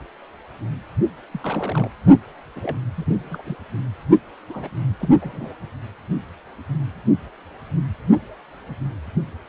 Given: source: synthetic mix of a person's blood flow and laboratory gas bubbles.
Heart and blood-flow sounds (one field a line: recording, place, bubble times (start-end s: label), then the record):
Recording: Doppler ultrasound of blood flow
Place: precordium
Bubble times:
1.31-1.40 s: bubbles
1.43-1.89 s: bubbles
2.55-2.77 s: bubbles
2.94-3.17 s: bubbles
3.30-3.56 s: bubbles
4.50-4.70 s: bubbles
5.00-5.16 s: bubbles
5.22-5.56 s: bubbles
From the record:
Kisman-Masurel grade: 221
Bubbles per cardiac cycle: several, 3 to 8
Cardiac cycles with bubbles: 10 to 50%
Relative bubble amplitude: barely perceptible (0.100 to 0.250)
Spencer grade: 2 (many but less than half of the cardiac periods contain bubble signals, singularly or in groups)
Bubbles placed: only in the low amplitude regions of the cardiac cycle